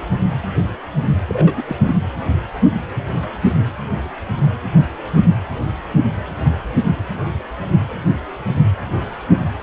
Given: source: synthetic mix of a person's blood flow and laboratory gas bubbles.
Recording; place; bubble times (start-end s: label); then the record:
Doppler ultrasound of blood flow; precordium
1.27-1.55 s: bubbles
1.57-1.62 s: bubbles
1.68-1.76 s: bubbles
1.87-1.95 s: bubbles
From the record:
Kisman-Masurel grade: 212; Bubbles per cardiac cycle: several, 3 to 8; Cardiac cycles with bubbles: 1 to 10%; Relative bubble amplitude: moderate (0.250 to 0.450); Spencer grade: 1 (occasional bubble signal discernible with the cardiac motion signal, with majority of cardiac periods free of bubbles); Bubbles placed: anywhere in the cardiac cycle